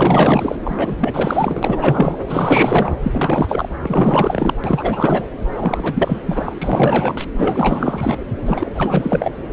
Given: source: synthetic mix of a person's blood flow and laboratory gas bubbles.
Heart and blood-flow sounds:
Doppler ultrasound of blood flow; subclavian vein
0.00-0.55 s: bubbles
0.64-2.17 s: bubbles
2.27-2.94 s: bubbles
3.02-3.69 s: bubbles
3.82-4.54 s: bubbles
4.64-5.25 s: bubbles
5.58-6.22 s: bubbles
6.25-7.25 s: bubbles
7.38-8.17 s: bubbles
8.45-8.71 s: bubbles
8.74-9.31 s: bubbles
From the record:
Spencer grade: 4 (maximum detectable bubble signal sounding continuously throughout systole and diastole of every cardiac period, and overriding the amplitude of the normal cardiac signals); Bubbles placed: anywhere in the cardiac cycle

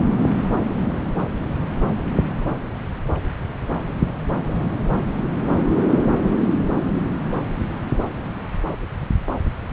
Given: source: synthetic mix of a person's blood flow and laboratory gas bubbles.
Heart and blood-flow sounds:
Doppler ultrasound of blood flow; subclavian vein
no bubbles
From the record:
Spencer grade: 0 (complete lack of bubble signals)

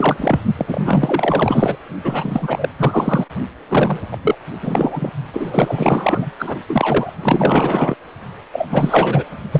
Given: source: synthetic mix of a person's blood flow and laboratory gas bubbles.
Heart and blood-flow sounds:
Doppler ultrasound of blood flow; precordium
0.00-0.40 s: bubbles
0.57-1.76 s: bubbles
2.04-2.69 s: bubbles
2.79-3.25 s: bubbles
3.68-4.00 s: bubbles
4.12-4.17 s: bubbles
4.22-4.35 s: bubbles
4.62-5.10 s: bubbles
5.33-6.30 s: bubbles
6.38-6.60 s: bubbles
6.69-7.12 s: bubbles
7.22-7.96 s: bubbles
8.53-9.24 s: bubbles
9.52-9.60 s: bubbles
From the record:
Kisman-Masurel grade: 444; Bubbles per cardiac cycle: continuous sound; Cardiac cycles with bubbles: 100%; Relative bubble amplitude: maximal (0.775 to 0.999); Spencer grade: 4 (maximum detectable bubble signal sounding continuously throughout systole and diastole of every cardiac period, and overriding the amplitude of the normal cardiac signals); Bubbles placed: only in the low amplitude regions of the cardiac cycle

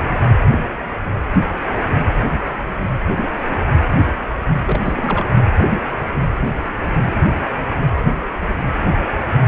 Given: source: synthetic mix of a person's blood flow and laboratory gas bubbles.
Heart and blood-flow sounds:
Doppler ultrasound of blood flow; precordium
4.65-5.25 s: bubbles
From the record:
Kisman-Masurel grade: 222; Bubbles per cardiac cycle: several, 3 to 8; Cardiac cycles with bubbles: 10 to 50%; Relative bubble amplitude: moderate (0.250 to 0.450); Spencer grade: 2 (many but less than half of the cardiac periods contain bubble signals, singularly or in groups); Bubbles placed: anywhere in the cardiac cycle

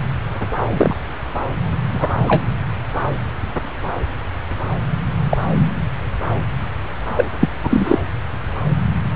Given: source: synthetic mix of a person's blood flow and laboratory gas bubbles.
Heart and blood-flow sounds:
Doppler ultrasound of blood flow; subclavian vein
0.72-0.96 s: bubbles
1.88-2.13 s: bubbles
2.27-2.45 s: bubbles
5.31-5.38 s: bubbles
7.16-7.25 s: bubbles
7.40-7.49 s: bubbles
7.62-7.97 s: bubbles
From the record:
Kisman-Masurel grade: 123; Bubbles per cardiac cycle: 1 to 2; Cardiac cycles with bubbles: 10 to 50%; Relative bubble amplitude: loud (0.450 to 0.775); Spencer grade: 2 (many but less than half of the cardiac periods contain bubble signals, singularly or in groups); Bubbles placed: anywhere in the cardiac cycle

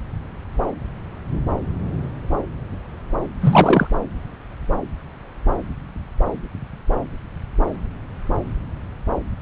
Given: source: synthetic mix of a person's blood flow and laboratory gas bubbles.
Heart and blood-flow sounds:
Doppler ultrasound of blood flow; subclavian vein
3.41-3.87 s: bubbles
From the record:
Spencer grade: 1 (occasional bubble signal discernible with the cardiac motion signal, with majority of cardiac periods free of bubbles); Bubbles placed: anywhere in the cardiac cycle

